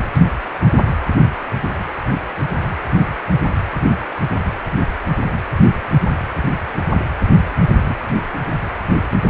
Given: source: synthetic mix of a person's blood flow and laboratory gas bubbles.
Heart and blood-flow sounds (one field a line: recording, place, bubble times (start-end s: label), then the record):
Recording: Doppler ultrasound of blood flow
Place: precordium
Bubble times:
7.84-7.94 s: bubbles
From the record:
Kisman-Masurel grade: 113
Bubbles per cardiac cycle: 1 to 2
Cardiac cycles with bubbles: 1 to 10%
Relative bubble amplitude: loud (0.450 to 0.775)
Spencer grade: 1 (occasional bubble signal discernible with the cardiac motion signal, with majority of cardiac periods free of bubbles)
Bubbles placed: anywhere in the cardiac cycle